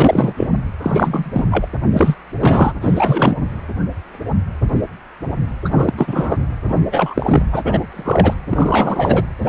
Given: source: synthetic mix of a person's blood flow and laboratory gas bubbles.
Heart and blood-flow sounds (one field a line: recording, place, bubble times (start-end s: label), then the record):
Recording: Doppler ultrasound of blood flow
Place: precordium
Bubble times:
0.00-0.34 s: bubbles
0.37-0.48 s: bubbles
0.82-1.46 s: bubbles
1.51-1.67 s: bubbles
1.91-2.15 s: bubbles
2.40-2.74 s: bubbles
2.81-3.35 s: bubbles
5.64-5.93 s: bubbles
5.97-6.37 s: bubbles
6.63-6.76 s: bubbles
6.92-7.48 s: bubbles
7.52-7.87 s: bubbles
7.91-8.34 s: bubbles
8.49-9.25 s: bubbles
9.42-9.49 s: bubbles
From the record:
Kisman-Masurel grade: 333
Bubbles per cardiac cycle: rolling drumbeat, 9 or more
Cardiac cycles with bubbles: 50 to 99%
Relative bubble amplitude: loud (0.450 to 0.775)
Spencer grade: 3 (all of the cardiac periods contain showers or single bubble signals, but not dominating or overriding the cardiac motion signals)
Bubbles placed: anywhere in the cardiac cycle